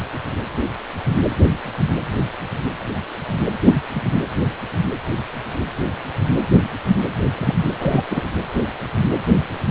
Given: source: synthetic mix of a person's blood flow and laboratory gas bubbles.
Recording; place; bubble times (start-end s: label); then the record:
Doppler ultrasound of blood flow; precordium
3.63-3.81 s: bubbles
3.94-4.01 s: bubbles
7.38-7.54 s: bubbles
7.80-8.02 s: bubbles
8.10-8.23 s: bubbles
From the record:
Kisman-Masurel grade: 213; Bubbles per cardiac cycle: several, 3 to 8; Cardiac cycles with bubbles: 1 to 10%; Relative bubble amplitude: loud (0.450 to 0.775); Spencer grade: 1 (occasional bubble signal discernible with the cardiac motion signal, with majority of cardiac periods free of bubbles); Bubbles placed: anywhere in the cardiac cycle